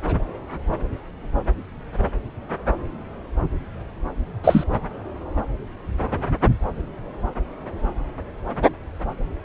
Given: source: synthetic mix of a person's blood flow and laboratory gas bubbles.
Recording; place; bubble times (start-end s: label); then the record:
Doppler ultrasound of blood flow; subclavian vein
4.44-4.63 s: bubbles
From the record:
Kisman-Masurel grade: 113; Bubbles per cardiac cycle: 1 to 2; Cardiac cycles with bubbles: 1 to 10%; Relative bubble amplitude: loud (0.450 to 0.775); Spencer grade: 1 (occasional bubble signal discernible with the cardiac motion signal, with majority of cardiac periods free of bubbles); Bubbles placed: anywhere in the cardiac cycle